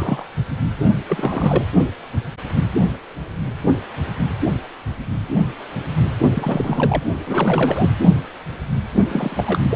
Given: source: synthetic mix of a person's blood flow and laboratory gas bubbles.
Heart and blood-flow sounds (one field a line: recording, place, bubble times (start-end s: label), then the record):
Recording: Doppler ultrasound of blood flow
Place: precordium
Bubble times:
0.00-0.24 s: bubbles
0.50-0.57 s: bubbles
1.08-1.65 s: bubbles
6.34-7.04 s: bubbles
7.26-7.90 s: bubbles
9.09-9.60 s: bubbles
9.63-9.76 s: bubbles
From the record:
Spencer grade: 3 (all of the cardiac periods contain showers or single bubble signals, but not dominating or overriding the cardiac motion signals)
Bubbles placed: only in the low amplitude regions of the cardiac cycle